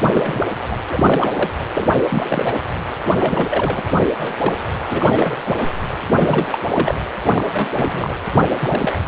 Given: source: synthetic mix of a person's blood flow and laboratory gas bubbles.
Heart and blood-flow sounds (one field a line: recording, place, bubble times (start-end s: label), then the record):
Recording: Doppler ultrasound of blood flow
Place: precordium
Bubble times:
0.00-0.09 s: bubbles
0.12-0.47 s: bubbles
0.71-0.77 s: bubbles
0.89-1.50 s: bubbles
1.74-1.90 s: bubbles
2.09-2.58 s: bubbles
3.10-3.83 s: bubbles
4.18-4.56 s: bubbles
4.85-5.35 s: bubbles
5.40-5.79 s: bubbles
6.19-6.58 s: bubbles
6.72-6.94 s: bubbles
7.25-7.44 s: bubbles
7.52-8.17 s: bubbles
8.57-9.00 s: bubbles
From the record:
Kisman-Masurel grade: 342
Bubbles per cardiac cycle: rolling drumbeat, 9 or more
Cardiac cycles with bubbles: 100%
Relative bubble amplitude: moderate (0.250 to 0.450)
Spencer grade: 3 (all of the cardiac periods contain showers or single bubble signals, but not dominating or overriding the cardiac motion signals)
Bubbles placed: anywhere in the cardiac cycle